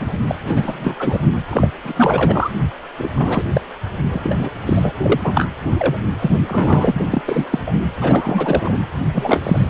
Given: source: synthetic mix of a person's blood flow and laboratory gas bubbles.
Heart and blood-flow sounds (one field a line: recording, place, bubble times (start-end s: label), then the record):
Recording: Doppler ultrasound of blood flow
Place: precordium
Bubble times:
0.00-0.18 s: bubbles
0.27-0.35 s: bubbles
0.42-0.95 s: bubbles
0.99-1.21 s: bubbles
1.50-1.67 s: bubbles
1.84-1.93 s: bubbles
1.96-2.50 s: bubbles
2.97-3.09 s: bubbles
3.13-3.42 s: bubbles
3.53-3.61 s: bubbles
4.09-4.50 s: bubbles
4.66-4.94 s: bubbles
5.02-5.21 s: bubbles
5.24-5.50 s: bubbles
5.77-5.97 s: bubbles
6.19-6.30 s: bubbles
6.46-7.06 s: bubbles
7.10-7.22 s: bubbles
7.28-7.46 s: bubbles
7.51-7.59 s: bubbles
7.66-7.72 s: bubbles
7.96-8.78 s: bubbles
9.12-9.70 s: bubbles
From the record:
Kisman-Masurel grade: 343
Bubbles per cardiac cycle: rolling drumbeat, 9 or more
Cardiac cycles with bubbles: 100%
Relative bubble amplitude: loud (0.450 to 0.775)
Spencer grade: 3 (all of the cardiac periods contain showers or single bubble signals, but not dominating or overriding the cardiac motion signals)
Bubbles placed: anywhere in the cardiac cycle